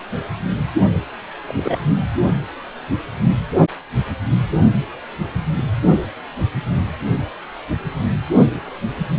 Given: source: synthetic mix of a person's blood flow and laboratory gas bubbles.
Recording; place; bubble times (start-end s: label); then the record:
Doppler ultrasound of blood flow; precordium
1.47-1.85 s: bubbles
From the record:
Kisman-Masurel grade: 113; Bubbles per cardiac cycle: 1 to 2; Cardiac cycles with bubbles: 1 to 10%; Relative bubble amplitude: loud (0.450 to 0.775); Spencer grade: 1 (occasional bubble signal discernible with the cardiac motion signal, with majority of cardiac periods free of bubbles); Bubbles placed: only in the low amplitude regions of the cardiac cycle